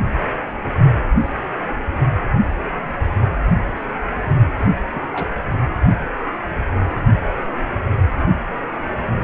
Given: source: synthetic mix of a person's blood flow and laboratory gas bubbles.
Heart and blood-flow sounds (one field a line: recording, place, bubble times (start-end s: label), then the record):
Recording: Doppler ultrasound of blood flow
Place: precordium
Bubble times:
4.57-4.66 s: bubbles
4.93-5.02 s: bubbles
5.12-5.35 s: bubbles
From the record:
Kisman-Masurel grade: 211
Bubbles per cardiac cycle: several, 3 to 8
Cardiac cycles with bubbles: 1 to 10%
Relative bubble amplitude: barely perceptible (0.100 to 0.250)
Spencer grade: 1 (occasional bubble signal discernible with the cardiac motion signal, with majority of cardiac periods free of bubbles)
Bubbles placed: only in the low amplitude regions of the cardiac cycle